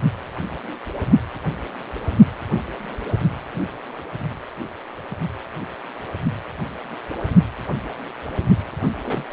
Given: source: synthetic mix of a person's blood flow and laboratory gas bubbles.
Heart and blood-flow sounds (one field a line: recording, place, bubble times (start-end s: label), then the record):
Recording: Doppler ultrasound of blood flow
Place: precordium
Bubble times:
9.04-9.23 s: bubbles
From the record:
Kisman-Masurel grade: 111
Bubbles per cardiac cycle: 1 to 2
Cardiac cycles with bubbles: 1 to 10%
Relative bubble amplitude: barely perceptible (0.100 to 0.250)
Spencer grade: 1 (occasional bubble signal discernible with the cardiac motion signal, with majority of cardiac periods free of bubbles)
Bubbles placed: anywhere in the cardiac cycle